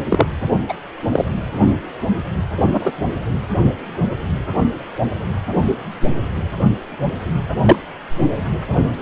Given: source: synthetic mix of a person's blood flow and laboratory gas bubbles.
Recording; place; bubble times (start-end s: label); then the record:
Doppler ultrasound of blood flow; precordium
0.09-0.26 s: bubbles
0.69-0.74 s: bubbles
1.11-1.25 s: bubbles
2.58-2.92 s: bubbles
7.65-7.77 s: bubbles
From the record:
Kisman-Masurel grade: 123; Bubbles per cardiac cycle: 1 to 2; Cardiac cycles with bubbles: 10 to 50%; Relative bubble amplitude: loud (0.450 to 0.775); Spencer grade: 2 (many but less than half of the cardiac periods contain bubble signals, singularly or in groups); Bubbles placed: anywhere in the cardiac cycle